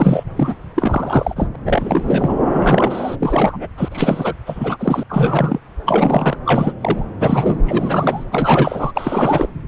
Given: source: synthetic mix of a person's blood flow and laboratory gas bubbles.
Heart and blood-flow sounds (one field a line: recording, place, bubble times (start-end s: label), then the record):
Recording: Doppler ultrasound of blood flow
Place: subclavian vein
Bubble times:
0.00-0.24 s: bubbles
0.36-0.55 s: bubbles
0.76-1.50 s: bubbles
1.54-1.56 s: bubbles
1.65-2.38 s: bubbles
2.50-3.16 s: bubbles
3.20-3.68 s: bubbles
3.77-3.88 s: bubbles
3.92-4.34 s: bubbles
4.46-5.03 s: bubbles
5.09-5.59 s: bubbles
5.86-6.38 s: bubbles
6.45-6.73 s: bubbles
6.80-7.07 s: bubbles
7.20-7.57 s: bubbles
7.65-8.23 s: bubbles
8.31-8.92 s: bubbles
8.95-9.47 s: bubbles
From the record:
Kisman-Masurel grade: 343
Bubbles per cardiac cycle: rolling drumbeat, 9 or more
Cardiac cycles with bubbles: 100%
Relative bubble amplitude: loud (0.450 to 0.775)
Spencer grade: 3 (all of the cardiac periods contain showers or single bubble signals, but not dominating or overriding the cardiac motion signals)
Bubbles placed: anywhere in the cardiac cycle